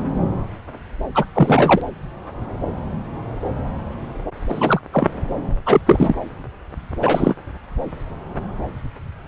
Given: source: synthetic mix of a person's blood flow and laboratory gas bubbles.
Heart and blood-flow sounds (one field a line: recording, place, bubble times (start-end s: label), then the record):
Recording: Doppler ultrasound of blood flow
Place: subclavian vein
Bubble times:
1.15-1.25 s: bubbles
1.35-1.81 s: bubbles
4.49-4.80 s: bubbles
4.93-5.11 s: bubbles
5.66-5.81 s: bubbles
5.86-6.15 s: bubbles
7.02-7.35 s: bubbles
From the record:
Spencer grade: 2 (many but less than half of the cardiac periods contain bubble signals, singularly or in groups)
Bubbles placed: anywhere in the cardiac cycle